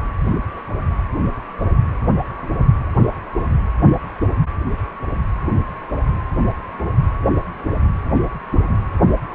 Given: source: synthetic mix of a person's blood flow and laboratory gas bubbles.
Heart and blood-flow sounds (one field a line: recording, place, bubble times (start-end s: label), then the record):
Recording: Doppler ultrasound of blood flow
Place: precordium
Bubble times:
no bubbles
From the record:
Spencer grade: 0 (complete lack of bubble signals)